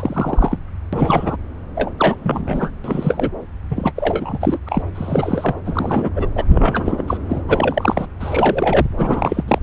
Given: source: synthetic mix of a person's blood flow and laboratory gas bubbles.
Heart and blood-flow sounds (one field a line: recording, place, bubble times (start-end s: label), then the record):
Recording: Doppler ultrasound of blood flow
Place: subclavian vein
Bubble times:
0.00-0.58 s: bubbles
0.92-1.36 s: bubbles
1.74-1.91 s: bubbles
1.98-2.17 s: bubbles
2.23-2.70 s: bubbles
2.84-3.29 s: bubbles
3.70-3.92 s: bubbles
3.95-4.38 s: bubbles
4.41-4.58 s: bubbles
4.67-4.83 s: bubbles
4.95-5.55 s: bubbles
5.66-6.10 s: bubbles
6.15-6.28 s: bubbles
6.36-6.45 s: bubbles
6.48-7.03 s: bubbles
7.07-7.18 s: bubbles
7.29-7.43 s: bubbles
7.48-8.06 s: bubbles
8.20-8.87 s: bubbles
8.97-9.44 s: bubbles
9.47-9.59 s: bubbles
From the record:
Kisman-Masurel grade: 342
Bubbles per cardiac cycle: rolling drumbeat, 9 or more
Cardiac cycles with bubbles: 100%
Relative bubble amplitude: moderate (0.250 to 0.450)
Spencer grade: 3 (all of the cardiac periods contain showers or single bubble signals, but not dominating or overriding the cardiac motion signals)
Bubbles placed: anywhere in the cardiac cycle